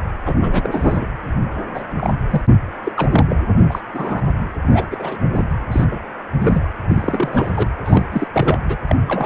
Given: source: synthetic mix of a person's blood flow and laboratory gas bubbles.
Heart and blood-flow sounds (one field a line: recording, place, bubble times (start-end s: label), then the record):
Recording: Doppler ultrasound of blood flow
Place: precordium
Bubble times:
0.25-0.69 s: bubbles
0.71-1.07 s: bubbles
1.74-1.83 s: bubbles
1.97-2.12 s: bubbles
2.30-2.42 s: bubbles
2.84-2.92 s: bubbles
2.96-3.25 s: bubbles
3.29-3.36 s: bubbles
3.69-3.81 s: bubbles
3.94-4.22 s: bubbles
4.68-5.18 s: bubbles
5.35-5.45 s: bubbles
5.71-5.85 s: bubbles
5.91-5.99 s: bubbles
6.39-6.70 s: bubbles
6.88-7.69 s: bubbles
7.84-8.28 s: bubbles
8.33-8.58 s: bubbles
8.66-8.77 s: bubbles
8.87-8.96 s: bubbles
9.07-9.26 s: bubbles
From the record:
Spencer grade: 3 (all of the cardiac periods contain showers or single bubble signals, but not dominating or overriding the cardiac motion signals)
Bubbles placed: anywhere in the cardiac cycle